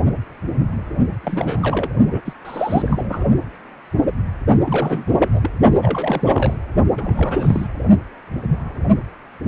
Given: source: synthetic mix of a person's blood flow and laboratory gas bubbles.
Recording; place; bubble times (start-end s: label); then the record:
Doppler ultrasound of blood flow; precordium
1.23-1.89 s: bubbles
2.10-2.21 s: bubbles
2.25-2.33 s: bubbles
2.44-3.25 s: bubbles
4.64-5.51 s: bubbles
5.82-6.56 s: bubbles
6.96-7.68 s: bubbles
From the record:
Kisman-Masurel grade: 332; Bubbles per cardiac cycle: rolling drumbeat, 9 or more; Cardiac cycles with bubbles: 50 to 99%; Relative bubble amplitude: moderate (0.250 to 0.450); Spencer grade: 3 (all of the cardiac periods contain showers or single bubble signals, but not dominating or overriding the cardiac motion signals); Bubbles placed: only in the low amplitude regions of the cardiac cycle